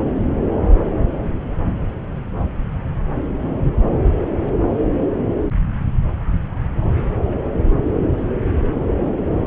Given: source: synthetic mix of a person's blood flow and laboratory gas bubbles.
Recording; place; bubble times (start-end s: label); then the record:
Doppler ultrasound of blood flow; subclavian vein
no bubbles
From the record:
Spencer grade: 0 (complete lack of bubble signals)